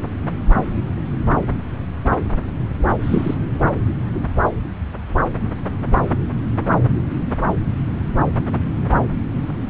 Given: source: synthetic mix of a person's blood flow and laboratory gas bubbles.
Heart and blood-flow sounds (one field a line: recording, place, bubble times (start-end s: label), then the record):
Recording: Doppler ultrasound of blood flow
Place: subclavian vein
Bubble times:
3.03-3.34 s: bubbles
From the record:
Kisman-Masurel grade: 113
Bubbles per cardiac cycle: 1 to 2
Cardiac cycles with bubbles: 1 to 10%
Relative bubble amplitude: loud (0.450 to 0.775)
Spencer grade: 1 (occasional bubble signal discernible with the cardiac motion signal, with majority of cardiac periods free of bubbles)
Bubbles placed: anywhere in the cardiac cycle